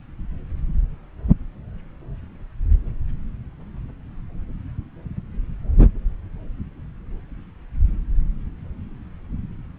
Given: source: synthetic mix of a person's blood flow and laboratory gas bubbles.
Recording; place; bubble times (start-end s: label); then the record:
Doppler ultrasound of blood flow; subclavian vein
no bubbles
From the record:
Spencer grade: 0 (complete lack of bubble signals)